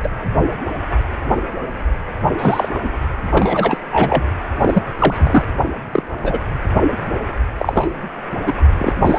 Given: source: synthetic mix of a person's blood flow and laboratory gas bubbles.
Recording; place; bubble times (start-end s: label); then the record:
Doppler ultrasound of blood flow; precordium
0.03-0.08 s: bubbles
2.38-2.69 s: bubbles
2.74-2.79 s: bubbles
2.83-2.89 s: bubbles
3.30-3.77 s: bubbles
3.92-4.23 s: bubbles
4.59-4.83 s: bubbles
4.94-5.45 s: bubbles
5.92-6.03 s: bubbles
6.22-6.40 s: bubbles
7.58-7.88 s: bubbles
8.47-8.54 s: bubbles
8.78-8.93 s: bubbles
8.96-9.19 s: bubbles
From the record:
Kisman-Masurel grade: 233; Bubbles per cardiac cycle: several, 3 to 8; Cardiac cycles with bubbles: 50 to 99%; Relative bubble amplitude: loud (0.450 to 0.775); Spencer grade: 3 (all of the cardiac periods contain showers or single bubble signals, but not dominating or overriding the cardiac motion signals); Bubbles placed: anywhere in the cardiac cycle